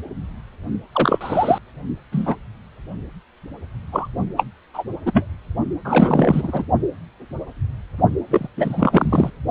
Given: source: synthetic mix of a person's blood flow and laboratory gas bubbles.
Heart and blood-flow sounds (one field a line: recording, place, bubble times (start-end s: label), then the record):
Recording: Doppler ultrasound of blood flow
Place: precordium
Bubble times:
0.92-1.58 s: bubbles
2.12-2.36 s: bubbles
3.92-4.08 s: bubbles
4.37-4.46 s: bubbles
4.74-4.83 s: bubbles
5.05-5.26 s: bubbles
5.84-6.65 s: bubbles
8.30-8.47 s: bubbles
8.57-9.30 s: bubbles
From the record:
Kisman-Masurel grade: 233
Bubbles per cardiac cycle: several, 3 to 8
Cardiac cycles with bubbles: 50 to 99%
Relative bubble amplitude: loud (0.450 to 0.775)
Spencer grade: 3 (all of the cardiac periods contain showers or single bubble signals, but not dominating or overriding the cardiac motion signals)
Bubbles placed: only in the low amplitude regions of the cardiac cycle